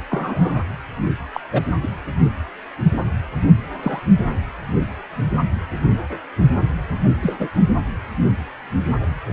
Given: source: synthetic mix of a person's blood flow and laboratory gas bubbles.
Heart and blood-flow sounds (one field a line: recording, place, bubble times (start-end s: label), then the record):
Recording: Doppler ultrasound of blood flow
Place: precordium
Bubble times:
0.09-0.64 s: bubbles
1.34-1.41 s: bubbles
1.52-1.62 s: bubbles
1.83-1.87 s: bubbles
3.82-3.99 s: bubbles
7.21-7.49 s: bubbles
From the record:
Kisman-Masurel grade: 122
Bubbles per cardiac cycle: 1 to 2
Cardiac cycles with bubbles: 10 to 50%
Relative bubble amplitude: moderate (0.250 to 0.450)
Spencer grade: 2 (many but less than half of the cardiac periods contain bubble signals, singularly or in groups)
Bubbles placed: anywhere in the cardiac cycle